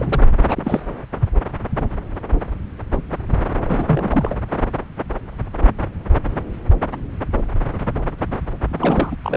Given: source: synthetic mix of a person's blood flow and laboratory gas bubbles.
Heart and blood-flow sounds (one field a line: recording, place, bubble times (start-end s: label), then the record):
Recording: Doppler ultrasound of blood flow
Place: subclavian vein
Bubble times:
0.00-0.23 s: bubbles
0.49-0.80 s: bubbles
3.65-4.35 s: bubbles
8.68-9.16 s: bubbles
9.24-9.37 s: bubbles
From the record:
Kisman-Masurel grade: 222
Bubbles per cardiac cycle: several, 3 to 8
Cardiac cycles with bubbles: 10 to 50%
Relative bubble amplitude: moderate (0.250 to 0.450)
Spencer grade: 2 (many but less than half of the cardiac periods contain bubble signals, singularly or in groups)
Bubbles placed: anywhere in the cardiac cycle